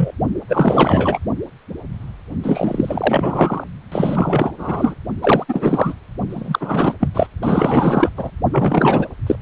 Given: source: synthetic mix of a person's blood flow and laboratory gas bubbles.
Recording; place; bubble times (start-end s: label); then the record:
Doppler ultrasound of blood flow; precordium
0.00-0.11 s: bubbles
0.48-1.19 s: bubbles
2.43-3.64 s: bubbles
3.92-4.52 s: bubbles
4.58-4.95 s: bubbles
5.21-5.45 s: bubbles
5.48-5.94 s: bubbles
6.29-6.94 s: bubbles
7.00-7.08 s: bubbles
7.14-7.26 s: bubbles
7.42-8.10 s: bubbles
8.17-8.30 s: bubbles
8.53-9.06 s: bubbles
9.27-9.36 s: bubbles
From the record:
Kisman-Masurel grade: 333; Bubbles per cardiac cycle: rolling drumbeat, 9 or more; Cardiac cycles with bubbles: 50 to 99%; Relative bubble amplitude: loud (0.450 to 0.775); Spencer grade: 3 (all of the cardiac periods contain showers or single bubble signals, but not dominating or overriding the cardiac motion signals); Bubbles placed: only in the low amplitude regions of the cardiac cycle